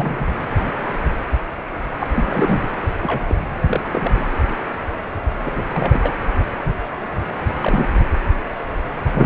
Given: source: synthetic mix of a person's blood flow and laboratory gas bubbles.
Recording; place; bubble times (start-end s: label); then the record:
Doppler ultrasound of blood flow; precordium
0.00-0.27 s: bubbles
2.00-2.10 s: bubbles
2.12-2.62 s: bubbles
3.01-3.24 s: bubbles
3.27-3.35 s: bubbles
3.67-3.80 s: bubbles
3.83-4.26 s: bubbles
5.44-5.63 s: bubbles
5.74-6.12 s: bubbles
7.62-7.87 s: bubbles
From the record:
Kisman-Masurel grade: 232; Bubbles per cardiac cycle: several, 3 to 8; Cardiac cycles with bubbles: 50 to 99%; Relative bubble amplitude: moderate (0.250 to 0.450); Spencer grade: 3 (all of the cardiac periods contain showers or single bubble signals, but not dominating or overriding the cardiac motion signals); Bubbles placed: anywhere in the cardiac cycle